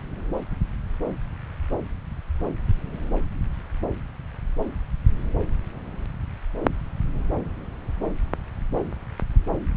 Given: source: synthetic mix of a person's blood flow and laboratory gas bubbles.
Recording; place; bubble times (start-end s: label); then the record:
Doppler ultrasound of blood flow; subclavian vein
no bubbles
From the record:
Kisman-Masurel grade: 000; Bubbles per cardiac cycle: 0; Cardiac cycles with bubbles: 0%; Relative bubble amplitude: no bubbles discernible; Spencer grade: 0 (complete lack of bubble signals)